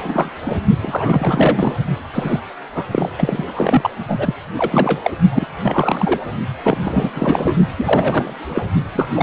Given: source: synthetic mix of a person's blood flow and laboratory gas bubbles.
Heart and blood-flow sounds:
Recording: Doppler ultrasound of blood flow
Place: precordium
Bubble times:
0.00-0.40 s: bubbles
0.46-0.60 s: bubbles
0.81-1.78 s: bubbles
2.14-2.40 s: bubbles
2.75-2.85 s: bubbles
2.91-3.09 s: bubbles
3.18-3.90 s: bubbles
4.08-4.35 s: bubbles
4.58-5.17 s: bubbles
5.31-5.45 s: bubbles
5.62-6.20 s: bubbles
6.62-6.78 s: bubbles
6.84-7.11 s: bubbles
7.14-7.54 s: bubbles
7.78-8.34 s: bubbles
8.49-8.62 s: bubbles
8.95-9.07 s: bubbles
9.14-9.23 s: bubbles
From the record:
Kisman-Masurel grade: 343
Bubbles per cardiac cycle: rolling drumbeat, 9 or more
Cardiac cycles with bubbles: 100%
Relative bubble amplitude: loud (0.450 to 0.775)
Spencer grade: 3 (all of the cardiac periods contain showers or single bubble signals, but not dominating or overriding the cardiac motion signals)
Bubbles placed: only in the low amplitude regions of the cardiac cycle

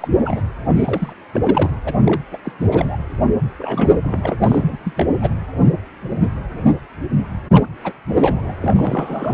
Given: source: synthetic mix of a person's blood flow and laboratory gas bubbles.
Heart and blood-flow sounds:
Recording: Doppler ultrasound of blood flow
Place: precordium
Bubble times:
0.00-0.08 s: bubbles
0.17-0.41 s: bubbles
0.69-1.16 s: bubbles
1.33-1.70 s: bubbles
1.84-1.96 s: bubbles
2.06-2.21 s: bubbles
2.31-2.37 s: bubbles
2.44-2.52 s: bubbles
2.58-2.97 s: bubbles
3.58-3.98 s: bubbles
4.03-4.37 s: bubbles
4.44-4.78 s: bubbles
4.84-4.93 s: bubbles
4.98-5.07 s: bubbles
5.21-5.33 s: bubbles
7.50-7.66 s: bubbles
7.84-7.93 s: bubbles
8.07-8.55 s: bubbles
8.61-9.34 s: bubbles
From the record:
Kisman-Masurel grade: 332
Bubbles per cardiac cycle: rolling drumbeat, 9 or more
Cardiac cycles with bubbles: 50 to 99%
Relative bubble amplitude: moderate (0.250 to 0.450)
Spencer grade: 3 (all of the cardiac periods contain showers or single bubble signals, but not dominating or overriding the cardiac motion signals)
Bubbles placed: anywhere in the cardiac cycle

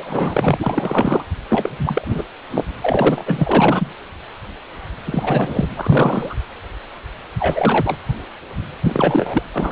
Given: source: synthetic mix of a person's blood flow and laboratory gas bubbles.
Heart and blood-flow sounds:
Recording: Doppler ultrasound of blood flow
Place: precordium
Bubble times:
0.00-1.24 s: bubbles
1.49-2.23 s: bubbles
2.52-2.65 s: bubbles
2.81-3.92 s: bubbles
5.04-5.67 s: bubbles
5.77-6.36 s: bubbles
7.39-7.98 s: bubbles
8.83-9.43 s: bubbles
9.53-9.72 s: bubbles
From the record:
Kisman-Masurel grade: 333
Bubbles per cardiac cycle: rolling drumbeat, 9 or more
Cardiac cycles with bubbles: 50 to 99%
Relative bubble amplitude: loud (0.450 to 0.775)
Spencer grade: 3 (all of the cardiac periods contain showers or single bubble signals, but not dominating or overriding the cardiac motion signals)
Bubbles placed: anywhere in the cardiac cycle

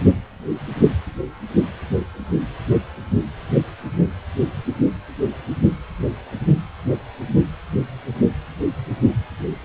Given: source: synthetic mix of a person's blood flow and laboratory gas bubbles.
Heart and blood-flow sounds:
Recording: Doppler ultrasound of blood flow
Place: precordium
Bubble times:
no bubbles
From the record:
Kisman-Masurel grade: 000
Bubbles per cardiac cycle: 0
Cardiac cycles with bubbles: 0%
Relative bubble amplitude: no bubbles discernible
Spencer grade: 0 (complete lack of bubble signals)

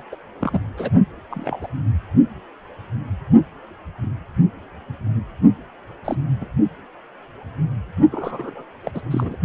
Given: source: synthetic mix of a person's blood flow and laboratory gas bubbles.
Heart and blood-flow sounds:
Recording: Doppler ultrasound of blood flow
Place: precordium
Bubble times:
0.00-0.02 s: bubbles
0.11-0.15 s: bubbles
0.40-0.59 s: bubbles
0.77-0.91 s: bubbles
1.31-1.59 s: bubbles
1.61-1.68 s: bubbles
6.04-6.17 s: bubbles
6.41-6.46 s: bubbles
8.11-8.64 s: bubbles
8.83-8.91 s: bubbles
8.94-9.01 s: bubbles
9.11-9.36 s: bubbles
From the record:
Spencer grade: 2 (many but less than half of the cardiac periods contain bubble signals, singularly or in groups)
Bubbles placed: only in the low amplitude regions of the cardiac cycle

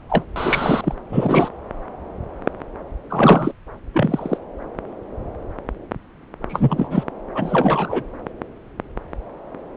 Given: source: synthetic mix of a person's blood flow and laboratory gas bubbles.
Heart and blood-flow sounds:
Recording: Doppler ultrasound of blood flow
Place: subclavian vein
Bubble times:
0.09-0.24 s: bubbles
0.36-0.95 s: bubbles
1.09-1.50 s: bubbles
3.10-3.52 s: bubbles
3.94-4.38 s: bubbles
6.49-7.04 s: bubbles
7.34-8.03 s: bubbles
From the record:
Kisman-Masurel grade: 233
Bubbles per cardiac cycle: several, 3 to 8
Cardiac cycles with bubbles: 50 to 99%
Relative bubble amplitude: loud (0.450 to 0.775)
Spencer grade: 3 (all of the cardiac periods contain showers or single bubble signals, but not dominating or overriding the cardiac motion signals)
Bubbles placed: anywhere in the cardiac cycle

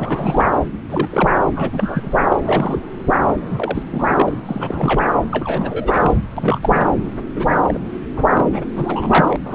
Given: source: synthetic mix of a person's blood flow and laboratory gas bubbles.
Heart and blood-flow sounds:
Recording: Doppler ultrasound of blood flow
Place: subclavian vein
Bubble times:
0.00-0.57 s: bubbles
0.88-1.29 s: bubbles
1.34-1.45 s: bubbles
1.55-2.16 s: bubbles
2.28-2.79 s: bubbles
3.28-3.33 s: bubbles
3.51-3.83 s: bubbles
3.90-4.32 s: bubbles
4.46-5.09 s: bubbles
5.31-6.15 s: bubbles
6.37-6.58 s: bubbles
6.62-6.86 s: bubbles
7.35-7.79 s: bubbles
8.16-8.26 s: bubbles
8.33-8.46 s: bubbles
8.52-8.65 s: bubbles
8.77-9.36 s: bubbles
9.45-9.55 s: bubbles
From the record:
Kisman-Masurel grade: 342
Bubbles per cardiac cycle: rolling drumbeat, 9 or more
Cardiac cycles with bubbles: 100%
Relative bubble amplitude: moderate (0.250 to 0.450)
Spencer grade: 3 (all of the cardiac periods contain showers or single bubble signals, but not dominating or overriding the cardiac motion signals)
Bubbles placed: anywhere in the cardiac cycle

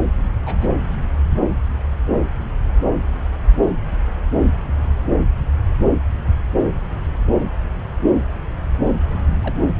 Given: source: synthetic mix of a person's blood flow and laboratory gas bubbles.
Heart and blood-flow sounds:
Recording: Doppler ultrasound of blood flow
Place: subclavian vein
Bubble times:
0.45-0.75 s: bubbles
9.42-9.54 s: bubbles
From the record:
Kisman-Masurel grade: 121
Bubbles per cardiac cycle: 1 to 2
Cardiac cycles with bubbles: 10 to 50%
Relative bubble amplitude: barely perceptible (0.100 to 0.250)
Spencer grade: 2 (many but less than half of the cardiac periods contain bubble signals, singularly or in groups)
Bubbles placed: anywhere in the cardiac cycle

